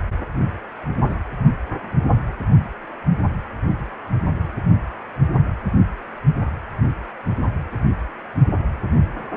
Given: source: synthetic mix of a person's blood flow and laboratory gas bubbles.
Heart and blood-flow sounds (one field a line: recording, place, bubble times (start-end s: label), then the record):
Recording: Doppler ultrasound of blood flow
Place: precordium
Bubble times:
1.10-1.15 s: bubbles
From the record:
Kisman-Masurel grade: 122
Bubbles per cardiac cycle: 1 to 2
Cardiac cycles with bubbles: 10 to 50%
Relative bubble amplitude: moderate (0.250 to 0.450)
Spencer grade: 2 (many but less than half of the cardiac periods contain bubble signals, singularly or in groups)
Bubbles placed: only in the low amplitude regions of the cardiac cycle